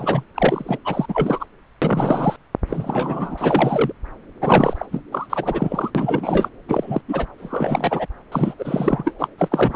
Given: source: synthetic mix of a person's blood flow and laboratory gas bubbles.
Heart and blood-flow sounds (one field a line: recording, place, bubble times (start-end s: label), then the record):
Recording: Doppler ultrasound of blood flow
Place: subclavian vein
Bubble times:
0.00-0.23 s: bubbles
0.34-0.78 s: bubbles
0.84-1.06 s: bubbles
1.08-1.46 s: bubbles
1.81-2.37 s: bubbles
2.67-3.92 s: bubbles
4.41-4.86 s: bubbles
4.92-5.00 s: bubbles
5.12-5.26 s: bubbles
5.29-5.91 s: bubbles
5.95-6.49 s: bubbles
6.68-7.01 s: bubbles
7.08-7.26 s: bubbles
7.38-8.06 s: bubbles
8.31-8.54 s: bubbles
8.58-9.12 s: bubbles
9.19-9.28 s: bubbles
9.38-9.48 s: bubbles
9.51-9.76 s: bubbles
From the record:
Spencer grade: 3 (all of the cardiac periods contain showers or single bubble signals, but not dominating or overriding the cardiac motion signals)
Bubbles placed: anywhere in the cardiac cycle